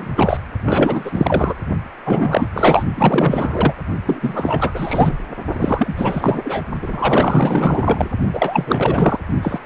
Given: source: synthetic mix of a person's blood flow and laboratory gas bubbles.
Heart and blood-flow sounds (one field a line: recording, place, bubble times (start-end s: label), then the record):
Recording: Doppler ultrasound of blood flow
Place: precordium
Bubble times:
0.00-0.13 s: bubbles
0.16-0.37 s: bubbles
0.65-1.54 s: bubbles
2.05-2.48 s: bubbles
2.52-2.83 s: bubbles
2.97-3.73 s: bubbles
4.05-4.71 s: bubbles
4.74-5.17 s: bubbles
5.52-5.93 s: bubbles
5.97-6.63 s: bubbles
6.82-8.09 s: bubbles
8.33-9.20 s: bubbles
9.42-9.59 s: bubbles
9.63-9.66 s: bubbles
From the record:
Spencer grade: 4 (maximum detectable bubble signal sounding continuously throughout systole and diastole of every cardiac period, and overriding the amplitude of the normal cardiac signals)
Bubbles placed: only in the low amplitude regions of the cardiac cycle